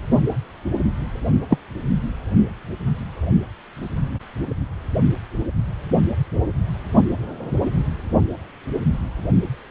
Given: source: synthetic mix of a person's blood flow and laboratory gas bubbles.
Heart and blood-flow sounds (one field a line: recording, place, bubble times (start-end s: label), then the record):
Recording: Doppler ultrasound of blood flow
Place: precordium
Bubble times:
1.50-1.58 s: bubbles
From the record:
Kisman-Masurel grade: 123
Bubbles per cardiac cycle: 1 to 2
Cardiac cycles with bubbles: 10 to 50%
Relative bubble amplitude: loud (0.450 to 0.775)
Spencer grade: 2 (many but less than half of the cardiac periods contain bubble signals, singularly or in groups)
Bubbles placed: only in the low amplitude regions of the cardiac cycle